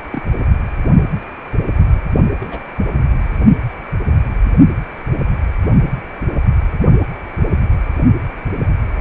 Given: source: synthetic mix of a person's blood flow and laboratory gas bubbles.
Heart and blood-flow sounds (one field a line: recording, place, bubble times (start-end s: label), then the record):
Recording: Doppler ultrasound of blood flow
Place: precordium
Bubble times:
0.11-0.22 s: bubbles
2.40-2.60 s: bubbles
From the record:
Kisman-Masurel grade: 121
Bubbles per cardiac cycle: 1 to 2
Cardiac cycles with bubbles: 10 to 50%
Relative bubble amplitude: barely perceptible (0.100 to 0.250)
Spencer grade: 2 (many but less than half of the cardiac periods contain bubble signals, singularly or in groups)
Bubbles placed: anywhere in the cardiac cycle